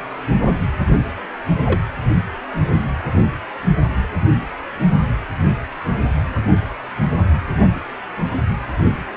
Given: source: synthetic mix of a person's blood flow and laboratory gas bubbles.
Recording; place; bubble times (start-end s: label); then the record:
Doppler ultrasound of blood flow; precordium
1.66-1.79 s: bubbles
From the record:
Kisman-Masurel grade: 112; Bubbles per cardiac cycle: 1 to 2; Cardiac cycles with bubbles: 1 to 10%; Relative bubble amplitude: moderate (0.250 to 0.450); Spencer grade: 1 (occasional bubble signal discernible with the cardiac motion signal, with majority of cardiac periods free of bubbles); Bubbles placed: only in the low amplitude regions of the cardiac cycle